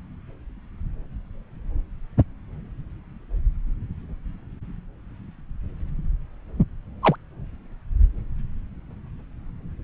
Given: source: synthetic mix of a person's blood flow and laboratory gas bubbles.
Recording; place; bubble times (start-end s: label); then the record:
Doppler ultrasound of blood flow; subclavian vein
7.02-7.16 s: bubbles
From the record:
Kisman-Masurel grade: 112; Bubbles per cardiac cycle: 1 to 2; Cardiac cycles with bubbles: 1 to 10%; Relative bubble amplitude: moderate (0.250 to 0.450); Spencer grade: 1 (occasional bubble signal discernible with the cardiac motion signal, with majority of cardiac periods free of bubbles); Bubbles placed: anywhere in the cardiac cycle